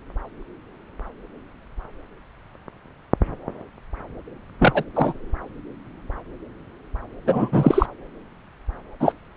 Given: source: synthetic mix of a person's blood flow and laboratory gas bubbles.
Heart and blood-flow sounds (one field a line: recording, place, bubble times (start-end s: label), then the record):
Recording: Doppler ultrasound of blood flow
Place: subclavian vein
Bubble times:
4.59-4.84 s: bubbles
4.95-5.13 s: bubbles
7.26-7.86 s: bubbles
9.00-9.13 s: bubbles
From the record:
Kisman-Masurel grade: 223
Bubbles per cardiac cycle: several, 3 to 8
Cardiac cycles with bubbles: 10 to 50%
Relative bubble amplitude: loud (0.450 to 0.775)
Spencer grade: 2 (many but less than half of the cardiac periods contain bubble signals, singularly or in groups)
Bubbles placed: anywhere in the cardiac cycle